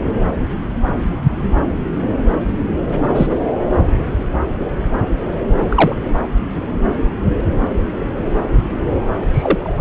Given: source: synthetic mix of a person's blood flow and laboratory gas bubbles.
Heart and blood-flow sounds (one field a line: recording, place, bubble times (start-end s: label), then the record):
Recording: Doppler ultrasound of blood flow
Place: subclavian vein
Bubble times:
3.15-3.26 s: bubbles
5.69-5.96 s: bubbles
6.13-6.20 s: bubbles
9.20-9.27 s: bubbles
9.31-9.73 s: bubbles
From the record:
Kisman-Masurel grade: 123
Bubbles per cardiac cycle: 1 to 2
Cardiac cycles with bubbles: 10 to 50%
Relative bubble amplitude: loud (0.450 to 0.775)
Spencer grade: 2 (many but less than half of the cardiac periods contain bubble signals, singularly or in groups)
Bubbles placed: anywhere in the cardiac cycle